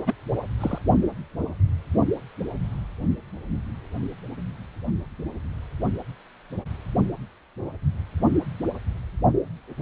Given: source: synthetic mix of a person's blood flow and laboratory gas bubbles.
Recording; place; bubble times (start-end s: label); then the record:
Doppler ultrasound of blood flow; precordium
0.06-0.14 s: bubbles
0.60-0.79 s: bubbles
From the record:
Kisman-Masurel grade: 112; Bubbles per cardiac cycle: 1 to 2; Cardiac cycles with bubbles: 1 to 10%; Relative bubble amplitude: moderate (0.250 to 0.450); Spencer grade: 1 (occasional bubble signal discernible with the cardiac motion signal, with majority of cardiac periods free of bubbles); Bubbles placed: only in the low amplitude regions of the cardiac cycle